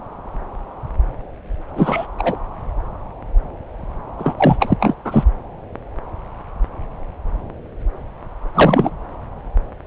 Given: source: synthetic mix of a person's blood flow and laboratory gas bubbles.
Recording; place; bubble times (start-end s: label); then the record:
Doppler ultrasound of blood flow; subclavian vein
1.75-2.06 s: bubbles
2.17-2.36 s: bubbles
4.18-4.74 s: bubbles
4.79-4.95 s: bubbles
5.04-5.24 s: bubbles
8.54-8.91 s: bubbles
From the record:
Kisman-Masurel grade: 223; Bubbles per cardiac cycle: several, 3 to 8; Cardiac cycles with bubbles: 10 to 50%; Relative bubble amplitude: loud (0.450 to 0.775); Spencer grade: 2 (many but less than half of the cardiac periods contain bubble signals, singularly or in groups); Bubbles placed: anywhere in the cardiac cycle